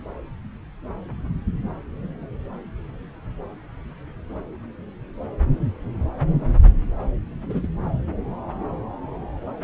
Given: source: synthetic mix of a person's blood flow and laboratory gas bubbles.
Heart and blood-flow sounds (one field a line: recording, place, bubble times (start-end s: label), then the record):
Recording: Doppler ultrasound of blood flow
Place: subclavian vein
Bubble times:
7.49-7.67 s: bubbles
From the record:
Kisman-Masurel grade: 221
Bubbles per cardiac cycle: several, 3 to 8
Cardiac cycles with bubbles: 10 to 50%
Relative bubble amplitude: barely perceptible (0.100 to 0.250)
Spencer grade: 2 (many but less than half of the cardiac periods contain bubble signals, singularly or in groups)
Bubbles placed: anywhere in the cardiac cycle